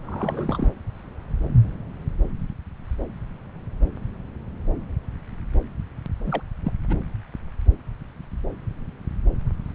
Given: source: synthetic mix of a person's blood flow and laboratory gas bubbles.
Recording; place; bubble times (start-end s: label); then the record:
Doppler ultrasound of blood flow; subclavian vein
0.05-0.69 s: bubbles
6.26-6.42 s: bubbles
6.64-6.72 s: bubbles
6.89-6.96 s: bubbles
From the record:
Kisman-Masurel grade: 211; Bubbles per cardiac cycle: several, 3 to 8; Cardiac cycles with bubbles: 1 to 10%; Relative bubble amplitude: barely perceptible (0.100 to 0.250); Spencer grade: 1 (occasional bubble signal discernible with the cardiac motion signal, with majority of cardiac periods free of bubbles); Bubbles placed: anywhere in the cardiac cycle